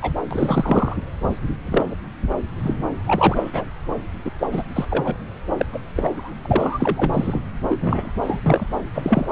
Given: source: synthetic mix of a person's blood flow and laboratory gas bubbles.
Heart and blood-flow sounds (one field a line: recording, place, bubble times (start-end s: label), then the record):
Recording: Doppler ultrasound of blood flow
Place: subclavian vein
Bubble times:
0.01-0.11 s: bubbles
0.30-0.96 s: bubbles
1.66-1.94 s: bubbles
2.62-2.74 s: bubbles
3.07-3.65 s: bubbles
4.25-4.30 s: bubbles
4.40-4.47 s: bubbles
4.52-4.64 s: bubbles
4.75-4.85 s: bubbles
4.90-5.14 s: bubbles
5.57-5.66 s: bubbles
5.72-5.78 s: bubbles
5.96-6.31 s: bubbles
6.42-7.40 s: bubbles
7.70-8.11 s: bubbles
8.21-8.41 s: bubbles
8.44-8.67 s: bubbles
8.94-9.26 s: bubbles
From the record:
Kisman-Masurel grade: 242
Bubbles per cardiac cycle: several, 3 to 8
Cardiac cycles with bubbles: 100%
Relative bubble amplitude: moderate (0.250 to 0.450)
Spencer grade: 3 (all of the cardiac periods contain showers or single bubble signals, but not dominating or overriding the cardiac motion signals)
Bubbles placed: anywhere in the cardiac cycle